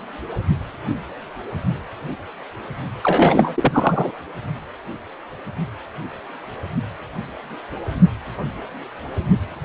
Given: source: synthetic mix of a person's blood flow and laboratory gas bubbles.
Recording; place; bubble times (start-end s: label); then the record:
Doppler ultrasound of blood flow; precordium
3.03-4.11 s: bubbles
From the record:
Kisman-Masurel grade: 223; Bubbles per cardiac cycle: several, 3 to 8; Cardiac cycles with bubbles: 10 to 50%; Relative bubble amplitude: loud (0.450 to 0.775); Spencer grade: 2 (many but less than half of the cardiac periods contain bubble signals, singularly or in groups); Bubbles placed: anywhere in the cardiac cycle